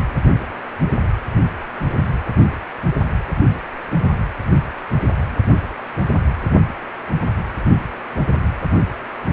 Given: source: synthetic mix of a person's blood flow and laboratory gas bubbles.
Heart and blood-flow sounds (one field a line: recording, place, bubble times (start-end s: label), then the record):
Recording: Doppler ultrasound of blood flow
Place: precordium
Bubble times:
no bubbles
From the record:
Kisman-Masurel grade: 000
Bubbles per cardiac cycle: 0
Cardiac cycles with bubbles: 0%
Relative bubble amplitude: no bubbles discernible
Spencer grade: 0 (complete lack of bubble signals)